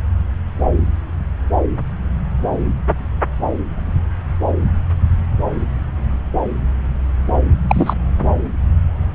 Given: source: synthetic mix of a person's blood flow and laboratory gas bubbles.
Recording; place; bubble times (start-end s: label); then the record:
Doppler ultrasound of blood flow; subclavian vein
7.69-7.94 s: bubbles
From the record:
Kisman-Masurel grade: 213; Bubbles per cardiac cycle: several, 3 to 8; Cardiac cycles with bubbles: 1 to 10%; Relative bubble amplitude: loud (0.450 to 0.775); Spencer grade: 1 (occasional bubble signal discernible with the cardiac motion signal, with majority of cardiac periods free of bubbles); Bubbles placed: anywhere in the cardiac cycle